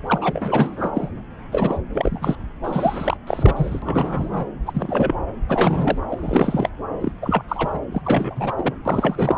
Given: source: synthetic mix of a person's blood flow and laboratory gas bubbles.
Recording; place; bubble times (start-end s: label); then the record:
Doppler ultrasound of blood flow; subclavian vein
0.06-0.90 s: bubbles
0.94-1.09 s: bubbles
1.51-1.78 s: bubbles
1.93-2.35 s: bubbles
2.63-3.17 s: bubbles
3.27-4.48 s: bubbles
4.67-5.15 s: bubbles
5.48-5.98 s: bubbles
6.09-6.69 s: bubbles
7.00-7.12 s: bubbles
7.21-7.44 s: bubbles
7.48-7.80 s: bubbles
7.92-8.02 s: bubbles
8.04-8.53 s: bubbles
8.58-8.71 s: bubbles
8.85-9.35 s: bubbles
From the record:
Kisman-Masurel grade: 342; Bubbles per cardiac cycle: rolling drumbeat, 9 or more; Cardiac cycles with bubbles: 100%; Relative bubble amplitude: moderate (0.250 to 0.450); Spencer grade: 3 (all of the cardiac periods contain showers or single bubble signals, but not dominating or overriding the cardiac motion signals); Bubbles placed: anywhere in the cardiac cycle